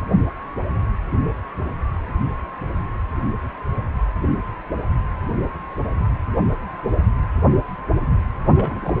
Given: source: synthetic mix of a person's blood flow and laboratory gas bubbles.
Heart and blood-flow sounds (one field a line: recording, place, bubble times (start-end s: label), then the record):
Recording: Doppler ultrasound of blood flow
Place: precordium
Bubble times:
8.45-8.94 s: bubbles
From the record:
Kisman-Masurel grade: 212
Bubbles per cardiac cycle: several, 3 to 8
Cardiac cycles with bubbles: 1 to 10%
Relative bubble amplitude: moderate (0.250 to 0.450)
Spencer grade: 1 (occasional bubble signal discernible with the cardiac motion signal, with majority of cardiac periods free of bubbles)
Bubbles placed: anywhere in the cardiac cycle